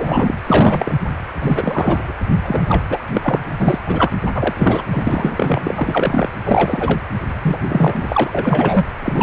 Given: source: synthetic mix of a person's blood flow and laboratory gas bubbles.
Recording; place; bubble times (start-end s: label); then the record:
Doppler ultrasound of blood flow; precordium
0.00-0.34 s: bubbles
0.45-0.94 s: bubbles
1.42-2.11 s: bubbles
2.40-2.82 s: bubbles
2.90-2.98 s: bubbles
3.12-3.40 s: bubbles
3.59-3.79 s: bubbles
3.84-4.12 s: bubbles
4.26-4.31 s: bubbles
4.34-4.54 s: bubbles
4.56-4.83 s: bubbles
4.91-5.60 s: bubbles
5.63-6.29 s: bubbles
6.45-7.01 s: bubbles
7.42-7.58 s: bubbles
7.68-8.85 s: bubbles
9.03-9.23 s: bubbles
From the record:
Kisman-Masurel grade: 343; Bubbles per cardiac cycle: rolling drumbeat, 9 or more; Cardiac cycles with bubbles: 100%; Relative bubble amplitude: loud (0.450 to 0.775); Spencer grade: 3 (all of the cardiac periods contain showers or single bubble signals, but not dominating or overriding the cardiac motion signals); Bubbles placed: anywhere in the cardiac cycle